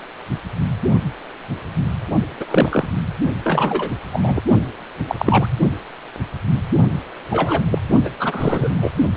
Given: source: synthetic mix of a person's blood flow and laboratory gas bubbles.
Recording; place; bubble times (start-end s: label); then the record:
Doppler ultrasound of blood flow; precordium
2.40-2.45 s: bubbles
2.48-2.88 s: bubbles
3.44-3.90 s: bubbles
4.13-4.42 s: bubbles
5.09-5.15 s: bubbles
5.19-5.47 s: bubbles
7.30-7.62 s: bubbles
7.71-7.79 s: bubbles
8.04-8.09 s: bubbles
8.19-8.91 s: bubbles
From the record:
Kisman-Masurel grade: 233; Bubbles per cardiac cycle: several, 3 to 8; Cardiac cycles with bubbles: 50 to 99%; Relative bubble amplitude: loud (0.450 to 0.775); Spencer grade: 3 (all of the cardiac periods contain showers or single bubble signals, but not dominating or overriding the cardiac motion signals); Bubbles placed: only in the low amplitude regions of the cardiac cycle